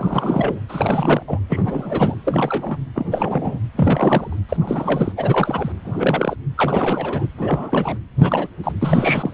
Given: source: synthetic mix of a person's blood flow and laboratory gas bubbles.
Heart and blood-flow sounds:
Doppler ultrasound of blood flow; precordium
0.00-0.61 s: bubbles
0.69-1.23 s: bubbles
1.28-1.40 s: bubbles
1.49-2.16 s: bubbles
2.25-2.77 s: bubbles
2.93-3.58 s: bubbles
3.76-4.36 s: bubbles
4.49-4.57 s: bubbles
4.61-5.12 s: bubbles
5.17-5.72 s: bubbles
5.85-6.36 s: bubbles
6.57-7.27 s: bubbles
7.38-7.98 s: bubbles
8.17-8.47 s: bubbles
8.63-8.72 s: bubbles
8.81-9.34 s: bubbles
From the record:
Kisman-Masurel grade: 343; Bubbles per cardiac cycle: rolling drumbeat, 9 or more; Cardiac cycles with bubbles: 100%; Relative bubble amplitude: loud (0.450 to 0.775); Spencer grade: 3 (all of the cardiac periods contain showers or single bubble signals, but not dominating or overriding the cardiac motion signals); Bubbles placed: anywhere in the cardiac cycle

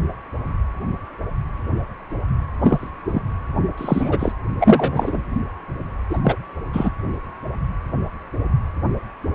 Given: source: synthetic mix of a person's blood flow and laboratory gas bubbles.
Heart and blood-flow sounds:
Doppler ultrasound of blood flow; precordium
2.61-2.90 s: bubbles
3.11-3.22 s: bubbles
3.77-4.32 s: bubbles
4.59-5.22 s: bubbles
6.09-6.21 s: bubbles
6.23-6.36 s: bubbles
6.72-6.90 s: bubbles
From the record:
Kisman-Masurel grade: 223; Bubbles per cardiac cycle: several, 3 to 8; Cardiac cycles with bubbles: 10 to 50%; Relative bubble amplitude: loud (0.450 to 0.775); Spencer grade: 2 (many but less than half of the cardiac periods contain bubble signals, singularly or in groups); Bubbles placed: anywhere in the cardiac cycle

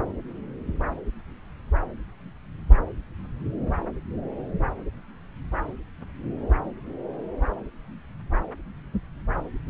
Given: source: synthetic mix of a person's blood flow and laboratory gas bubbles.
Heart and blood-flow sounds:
Doppler ultrasound of blood flow; subclavian vein
no bubbles
From the record:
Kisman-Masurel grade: 000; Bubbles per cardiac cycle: 0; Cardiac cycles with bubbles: 0%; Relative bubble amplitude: no bubbles discernible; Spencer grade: 0 (complete lack of bubble signals)

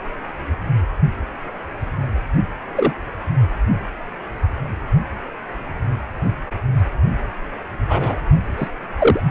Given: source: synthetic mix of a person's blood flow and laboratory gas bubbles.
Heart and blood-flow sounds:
Doppler ultrasound of blood flow; precordium
2.76-2.93 s: bubbles
7.89-8.17 s: bubbles
8.57-8.70 s: bubbles
8.98-9.20 s: bubbles
From the record:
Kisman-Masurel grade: 123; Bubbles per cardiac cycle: 1 to 2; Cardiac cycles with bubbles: 10 to 50%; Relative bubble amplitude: loud (0.450 to 0.775); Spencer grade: 2 (many but less than half of the cardiac periods contain bubble signals, singularly or in groups); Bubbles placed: anywhere in the cardiac cycle

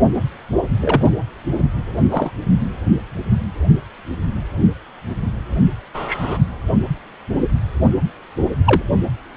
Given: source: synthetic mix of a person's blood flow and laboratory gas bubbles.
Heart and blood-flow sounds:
Doppler ultrasound of blood flow; precordium
0.81-1.10 s: bubbles
2.09-2.31 s: bubbles
5.94-6.38 s: bubbles
8.65-8.82 s: bubbles
From the record:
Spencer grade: 2 (many but less than half of the cardiac periods contain bubble signals, singularly or in groups); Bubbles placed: only in the low amplitude regions of the cardiac cycle

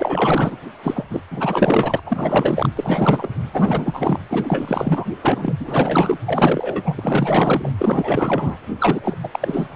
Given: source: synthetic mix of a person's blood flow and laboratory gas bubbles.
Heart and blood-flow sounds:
Doppler ultrasound of blood flow; precordium
0.00-0.57 s: bubbles
0.83-1.05 s: bubbles
1.10-1.21 s: bubbles
1.30-2.00 s: bubbles
2.06-2.69 s: bubbles
2.75-3.29 s: bubbles
3.53-4.19 s: bubbles
4.30-5.05 s: bubbles
5.21-5.54 s: bubbles
5.59-6.18 s: bubbles
6.25-7.69 s: bubbles
7.78-8.58 s: bubbles
8.79-9.01 s: bubbles
9.04-9.18 s: bubbles
9.23-9.29 s: bubbles
9.31-9.68 s: bubbles
9.71-9.76 s: bubbles
From the record:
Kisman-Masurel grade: 444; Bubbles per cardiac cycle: continuous sound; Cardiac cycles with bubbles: 100%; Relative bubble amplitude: maximal (0.775 to 0.999); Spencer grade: 4 (maximum detectable bubble signal sounding continuously throughout systole and diastole of every cardiac period, and overriding the amplitude of the normal cardiac signals); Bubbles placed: anywhere in the cardiac cycle

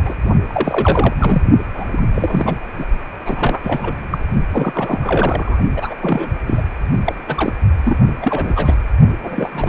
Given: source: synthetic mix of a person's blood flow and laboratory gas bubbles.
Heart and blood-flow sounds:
Doppler ultrasound of blood flow; precordium
0.05-0.14 s: bubbles
0.49-1.14 s: bubbles
1.19-1.43 s: bubbles
1.74-1.84 s: bubbles
1.88-2.02 s: bubbles
2.15-2.55 s: bubbles
2.78-2.86 s: bubbles
3.25-3.60 s: bubbles
3.62-3.96 s: bubbles
4.11-4.19 s: bubbles
4.50-5.58 s: bubbles
5.76-5.94 s: bubbles
6.01-6.29 s: bubbles
6.46-6.63 s: bubbles
7.04-7.15 s: bubbles
7.27-7.53 s: bubbles
7.84-7.99 s: bubbles
8.22-8.75 s: bubbles
9.22-9.49 s: bubbles
9.52-9.69 s: bubbles
From the record:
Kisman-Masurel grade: 342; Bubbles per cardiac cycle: rolling drumbeat, 9 or more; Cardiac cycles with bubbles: 100%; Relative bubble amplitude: moderate (0.250 to 0.450); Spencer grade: 3 (all of the cardiac periods contain showers or single bubble signals, but not dominating or overriding the cardiac motion signals); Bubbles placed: only in the low amplitude regions of the cardiac cycle

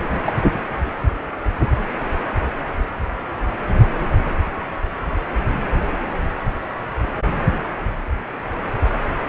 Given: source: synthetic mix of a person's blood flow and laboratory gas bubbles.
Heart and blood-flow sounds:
Doppler ultrasound of blood flow; precordium
0.11-0.17 s: bubbles
0.26-0.32 s: bubbles
From the record:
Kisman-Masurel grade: 212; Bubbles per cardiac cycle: several, 3 to 8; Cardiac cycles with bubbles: 1 to 10%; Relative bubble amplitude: moderate (0.250 to 0.450); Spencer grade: 1 (occasional bubble signal discernible with the cardiac motion signal, with majority of cardiac periods free of bubbles); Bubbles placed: anywhere in the cardiac cycle

